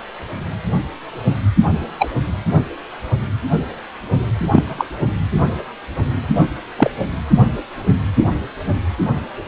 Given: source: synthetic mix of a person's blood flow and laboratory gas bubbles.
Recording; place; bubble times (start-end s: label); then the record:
Doppler ultrasound of blood flow; precordium
1.99-2.10 s: bubbles
4.37-4.85 s: bubbles
6.33-6.44 s: bubbles
6.77-6.91 s: bubbles
From the record:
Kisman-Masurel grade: 123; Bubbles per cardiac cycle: 1 to 2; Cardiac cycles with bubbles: 10 to 50%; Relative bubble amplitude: loud (0.450 to 0.775); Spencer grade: 2 (many but less than half of the cardiac periods contain bubble signals, singularly or in groups); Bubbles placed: anywhere in the cardiac cycle